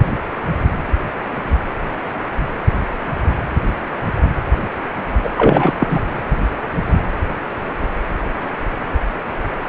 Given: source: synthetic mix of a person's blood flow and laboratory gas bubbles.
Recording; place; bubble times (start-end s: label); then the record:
Doppler ultrasound of blood flow; precordium
5.23-5.29 s: bubbles
5.37-5.73 s: bubbles
5.77-6.00 s: bubbles
From the record:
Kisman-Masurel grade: 213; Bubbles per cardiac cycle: several, 3 to 8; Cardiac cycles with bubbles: 1 to 10%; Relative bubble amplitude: loud (0.450 to 0.775); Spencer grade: 1 (occasional bubble signal discernible with the cardiac motion signal, with majority of cardiac periods free of bubbles); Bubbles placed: anywhere in the cardiac cycle